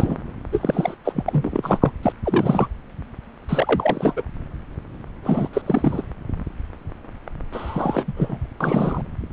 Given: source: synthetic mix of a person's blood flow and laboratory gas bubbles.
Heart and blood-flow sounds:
Doppler ultrasound of blood flow; subclavian vein
0.00-0.16 s: bubbles
0.52-0.95 s: bubbles
1.04-1.23 s: bubbles
1.26-1.93 s: bubbles
2.03-2.12 s: bubbles
2.23-2.68 s: bubbles
3.48-4.23 s: bubbles
5.24-5.49 s: bubbles
5.53-5.62 s: bubbles
5.66-6.03 s: bubbles
7.52-8.13 s: bubbles
8.16-8.38 s: bubbles
8.60-9.02 s: bubbles
From the record:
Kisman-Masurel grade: 333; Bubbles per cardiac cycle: rolling drumbeat, 9 or more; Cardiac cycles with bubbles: 50 to 99%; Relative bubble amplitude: loud (0.450 to 0.775); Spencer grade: 3 (all of the cardiac periods contain showers or single bubble signals, but not dominating or overriding the cardiac motion signals); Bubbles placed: anywhere in the cardiac cycle

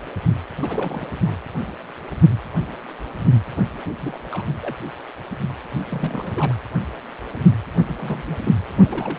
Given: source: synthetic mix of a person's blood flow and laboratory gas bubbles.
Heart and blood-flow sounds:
Doppler ultrasound of blood flow; precordium
0.60-1.06 s: bubbles
1.16-1.37 s: bubbles
4.01-4.19 s: bubbles
4.31-4.49 s: bubbles
4.61-4.76 s: bubbles
5.69-5.81 s: bubbles
5.89-6.54 s: bubbles
7.87-8.37 s: bubbles
8.43-8.51 s: bubbles
8.86-9.19 s: bubbles
From the record:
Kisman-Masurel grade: 221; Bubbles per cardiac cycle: several, 3 to 8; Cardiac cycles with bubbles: 10 to 50%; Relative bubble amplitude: barely perceptible (0.100 to 0.250); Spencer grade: 2 (many but less than half of the cardiac periods contain bubble signals, singularly or in groups); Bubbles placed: anywhere in the cardiac cycle

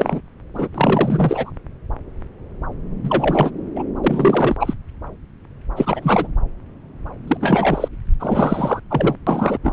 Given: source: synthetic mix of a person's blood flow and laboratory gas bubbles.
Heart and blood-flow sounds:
Doppler ultrasound of blood flow; subclavian vein
0.00-0.20 s: bubbles
0.54-0.68 s: bubbles
0.74-1.50 s: bubbles
3.02-3.51 s: bubbles
3.75-3.83 s: bubbles
4.04-4.55 s: bubbles
4.60-4.74 s: bubbles
5.76-6.28 s: bubbles
7.28-7.37 s: bubbles
7.41-7.88 s: bubbles
8.20-8.80 s: bubbles
8.90-9.16 s: bubbles
9.27-9.58 s: bubbles
9.63-9.72 s: bubbles
From the record:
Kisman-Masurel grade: 333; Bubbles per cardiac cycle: rolling drumbeat, 9 or more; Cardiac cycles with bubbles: 50 to 99%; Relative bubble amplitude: loud (0.450 to 0.775); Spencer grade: 3 (all of the cardiac periods contain showers or single bubble signals, but not dominating or overriding the cardiac motion signals); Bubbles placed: anywhere in the cardiac cycle

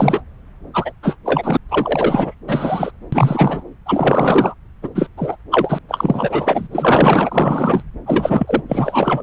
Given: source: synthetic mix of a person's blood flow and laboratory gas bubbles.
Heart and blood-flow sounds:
Doppler ultrasound of blood flow; subclavian vein
0.00-0.24 s: bubbles
0.73-0.92 s: bubbles
1.02-1.16 s: bubbles
1.25-1.57 s: bubbles
1.69-2.34 s: bubbles
2.48-2.92 s: bubbles
3.12-3.64 s: bubbles
3.86-4.54 s: bubbles
4.83-4.89 s: bubbles
4.95-5.08 s: bubbles
5.17-5.36 s: bubbles
5.51-5.79 s: bubbles
5.89-6.68 s: bubbles
6.71-7.83 s: bubbles
8.06-8.62 s: bubbles
8.68-9.22 s: bubbles
From the record:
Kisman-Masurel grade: 343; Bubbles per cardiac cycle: rolling drumbeat, 9 or more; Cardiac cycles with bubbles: 100%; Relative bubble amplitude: loud (0.450 to 0.775); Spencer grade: 3 (all of the cardiac periods contain showers or single bubble signals, but not dominating or overriding the cardiac motion signals); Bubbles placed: anywhere in the cardiac cycle

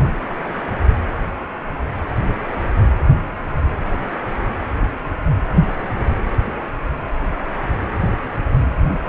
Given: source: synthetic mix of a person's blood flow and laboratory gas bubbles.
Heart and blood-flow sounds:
Doppler ultrasound of blood flow; precordium
8.88-8.98 s: bubbles
From the record:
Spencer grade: 1 (occasional bubble signal discernible with the cardiac motion signal, with majority of cardiac periods free of bubbles); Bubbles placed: anywhere in the cardiac cycle

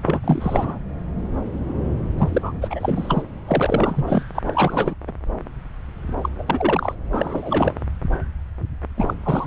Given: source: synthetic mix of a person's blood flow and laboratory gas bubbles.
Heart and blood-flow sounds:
Doppler ultrasound of blood flow; subclavian vein
0.03-0.78 s: bubbles
2.17-2.52 s: bubbles
2.61-3.23 s: bubbles
3.47-4.23 s: bubbles
4.35-4.40 s: bubbles
4.46-4.95 s: bubbles
5.07-5.12 s: bubbles
6.22-6.30 s: bubbles
6.38-6.44 s: bubbles
6.47-6.96 s: bubbles
7.12-7.73 s: bubbles
8.97-9.14 s: bubbles
9.25-9.47 s: bubbles
From the record:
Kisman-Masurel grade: 333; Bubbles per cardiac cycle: rolling drumbeat, 9 or more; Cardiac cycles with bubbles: 50 to 99%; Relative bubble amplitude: loud (0.450 to 0.775); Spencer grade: 3 (all of the cardiac periods contain showers or single bubble signals, but not dominating or overriding the cardiac motion signals); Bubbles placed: anywhere in the cardiac cycle

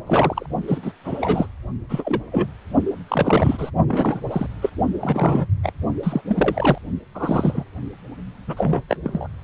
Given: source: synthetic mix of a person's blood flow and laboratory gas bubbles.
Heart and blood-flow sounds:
Doppler ultrasound of blood flow; precordium
0.06-0.46 s: bubbles
0.67-0.93 s: bubbles
1.04-1.46 s: bubbles
1.89-2.21 s: bubbles
2.31-2.47 s: bubbles
3.08-3.70 s: bubbles
3.88-4.21 s: bubbles
4.30-4.46 s: bubbles
4.62-4.69 s: bubbles
5.00-5.46 s: bubbles
5.63-5.72 s: bubbles
6.03-6.21 s: bubbles
6.27-6.78 s: bubbles
7.14-7.64 s: bubbles
8.47-8.82 s: bubbles
8.89-8.96 s: bubbles
9.03-9.28 s: bubbles
From the record:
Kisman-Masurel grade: 242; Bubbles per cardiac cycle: several, 3 to 8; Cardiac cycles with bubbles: 100%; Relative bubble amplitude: moderate (0.250 to 0.450); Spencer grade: 3 (all of the cardiac periods contain showers or single bubble signals, but not dominating or overriding the cardiac motion signals); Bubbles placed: only in the low amplitude regions of the cardiac cycle

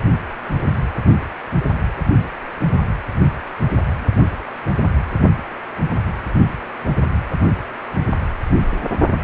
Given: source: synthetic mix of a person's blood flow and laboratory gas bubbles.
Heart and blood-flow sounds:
Doppler ultrasound of blood flow; precordium
no bubbles
From the record:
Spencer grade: 0 (complete lack of bubble signals)

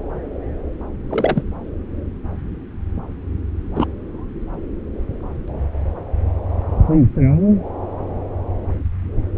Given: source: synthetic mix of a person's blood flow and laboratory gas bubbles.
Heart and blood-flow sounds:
Doppler ultrasound of blood flow; subclavian vein
1.09-1.43 s: bubbles
3.75-3.87 s: bubbles
From the record:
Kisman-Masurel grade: 222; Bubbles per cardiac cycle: several, 3 to 8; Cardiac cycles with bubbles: 10 to 50%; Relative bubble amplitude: moderate (0.250 to 0.450); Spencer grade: 2 (many but less than half of the cardiac periods contain bubble signals, singularly or in groups); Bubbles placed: anywhere in the cardiac cycle

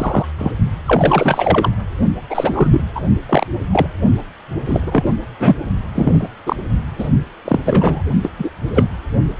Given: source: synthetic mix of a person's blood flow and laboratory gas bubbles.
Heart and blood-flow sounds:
Doppler ultrasound of blood flow; precordium
0.00-0.26 s: bubbles
0.38-0.52 s: bubbles
0.86-1.69 s: bubbles
2.29-2.81 s: bubbles
2.95-3.01 s: bubbles
3.29-3.47 s: bubbles
3.73-3.88 s: bubbles
4.65-5.11 s: bubbles
5.39-5.56 s: bubbles
5.94-6.29 s: bubbles
6.46-6.56 s: bubbles
6.98-7.08 s: bubbles
7.44-7.60 s: bubbles
7.65-8.02 s: bubbles
8.22-8.32 s: bubbles
8.38-8.50 s: bubbles
8.75-8.88 s: bubbles
From the record:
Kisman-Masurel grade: 243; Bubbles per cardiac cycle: several, 3 to 8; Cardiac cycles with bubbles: 100%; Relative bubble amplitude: loud (0.450 to 0.775); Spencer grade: 3 (all of the cardiac periods contain showers or single bubble signals, but not dominating or overriding the cardiac motion signals); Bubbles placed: only in the low amplitude regions of the cardiac cycle

